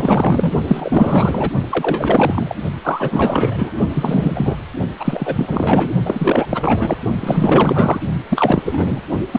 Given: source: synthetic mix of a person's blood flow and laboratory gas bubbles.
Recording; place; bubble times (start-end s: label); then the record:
Doppler ultrasound of blood flow; precordium
0.00-0.53 s: bubbles
0.67-1.50 s: bubbles
1.69-2.55 s: bubbles
2.84-3.71 s: bubbles
3.90-4.60 s: bubbles
5.00-5.91 s: bubbles
6.06-6.97 s: bubbles
7.20-8.01 s: bubbles
8.29-8.62 s: bubbles
8.65-9.01 s: bubbles
9.32-9.39 s: bubbles
From the record:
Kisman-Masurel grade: 444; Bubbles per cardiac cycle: continuous sound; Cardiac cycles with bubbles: 100%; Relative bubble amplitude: maximal (0.775 to 0.999); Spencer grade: 4 (maximum detectable bubble signal sounding continuously throughout systole and diastole of every cardiac period, and overriding the amplitude of the normal cardiac signals); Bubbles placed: only in the low amplitude regions of the cardiac cycle